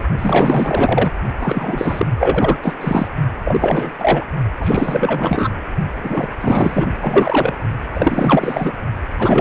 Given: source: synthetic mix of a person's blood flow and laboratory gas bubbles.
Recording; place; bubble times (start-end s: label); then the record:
Doppler ultrasound of blood flow; precordium
0.00-0.04 s: bubbles
0.18-1.11 s: bubbles
1.39-2.07 s: bubbles
2.18-2.56 s: bubbles
2.62-2.75 s: bubbles
2.81-3.08 s: bubbles
3.44-3.92 s: bubbles
3.98-4.26 s: bubbles
4.59-5.49 s: bubbles
6.03-6.29 s: bubbles
6.41-6.85 s: bubbles
7.00-7.55 s: bubbles
7.94-8.73 s: bubbles
9.18-9.41 s: bubbles
From the record:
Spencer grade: 4 (maximum detectable bubble signal sounding continuously throughout systole and diastole of every cardiac period, and overriding the amplitude of the normal cardiac signals); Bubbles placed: only in the low amplitude regions of the cardiac cycle